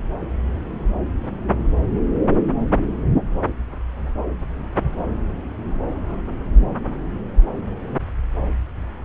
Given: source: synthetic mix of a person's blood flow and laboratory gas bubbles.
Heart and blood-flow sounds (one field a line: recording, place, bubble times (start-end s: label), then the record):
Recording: Doppler ultrasound of blood flow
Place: subclavian vein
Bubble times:
no bubbles
From the record:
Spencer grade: 0 (complete lack of bubble signals)